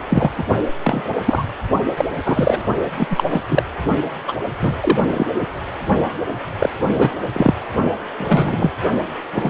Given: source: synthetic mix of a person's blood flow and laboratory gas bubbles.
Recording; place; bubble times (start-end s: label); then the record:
Doppler ultrasound of blood flow; precordium
0.09-0.31 s: bubbles
0.38-0.44 s: bubbles
0.83-1.09 s: bubbles
1.25-1.45 s: bubbles
1.97-2.05 s: bubbles
2.25-2.60 s: bubbles
2.97-3.07 s: bubbles
3.10-3.24 s: bubbles
3.30-3.44 s: bubbles
3.49-3.63 s: bubbles
4.28-4.34 s: bubbles
4.61-5.26 s: bubbles
6.58-6.70 s: bubbles
6.87-7.15 s: bubbles
7.33-7.54 s: bubbles
8.18-8.71 s: bubbles
9.34-9.50 s: bubbles
From the record:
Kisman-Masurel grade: 243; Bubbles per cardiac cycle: several, 3 to 8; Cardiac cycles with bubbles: 100%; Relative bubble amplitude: loud (0.450 to 0.775); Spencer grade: 3 (all of the cardiac periods contain showers or single bubble signals, but not dominating or overriding the cardiac motion signals); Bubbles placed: only in the low amplitude regions of the cardiac cycle